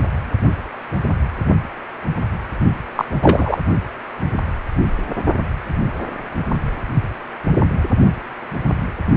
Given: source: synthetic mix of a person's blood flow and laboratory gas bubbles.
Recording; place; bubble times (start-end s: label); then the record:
Doppler ultrasound of blood flow; precordium
2.96-3.05 s: bubbles
3.22-3.57 s: bubbles
From the record:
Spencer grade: 2 (many but less than half of the cardiac periods contain bubble signals, singularly or in groups); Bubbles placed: only in the low amplitude regions of the cardiac cycle